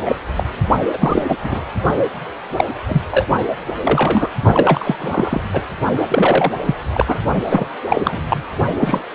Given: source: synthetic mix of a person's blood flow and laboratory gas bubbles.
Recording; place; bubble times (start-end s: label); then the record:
Doppler ultrasound of blood flow; precordium
0.05-0.16 s: bubbles
0.36-0.43 s: bubbles
0.93-1.24 s: bubbles
1.29-1.37 s: bubbles
1.43-1.66 s: bubbles
2.56-2.65 s: bubbles
2.87-3.02 s: bubbles
3.11-3.27 s: bubbles
3.84-4.28 s: bubbles
4.53-4.96 s: bubbles
4.98-5.41 s: bubbles
5.52-5.61 s: bubbles
6.08-6.52 s: bubbles
6.66-6.75 s: bubbles
6.94-7.19 s: bubbles
7.48-7.66 s: bubbles
7.89-8.21 s: bubbles
8.29-8.43 s: bubbles
8.79-9.05 s: bubbles
From the record:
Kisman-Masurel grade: 243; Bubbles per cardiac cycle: several, 3 to 8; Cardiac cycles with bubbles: 100%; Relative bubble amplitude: loud (0.450 to 0.775); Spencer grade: 3 (all of the cardiac periods contain showers or single bubble signals, but not dominating or overriding the cardiac motion signals); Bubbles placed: only in the low amplitude regions of the cardiac cycle